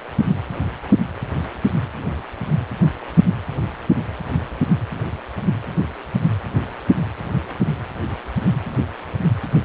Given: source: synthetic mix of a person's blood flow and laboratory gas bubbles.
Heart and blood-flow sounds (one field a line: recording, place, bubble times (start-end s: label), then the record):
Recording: Doppler ultrasound of blood flow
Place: precordium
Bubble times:
no bubbles
From the record:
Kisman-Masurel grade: 000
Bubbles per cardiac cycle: 0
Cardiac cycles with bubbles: 0%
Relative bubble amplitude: no bubbles discernible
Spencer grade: 0 (complete lack of bubble signals)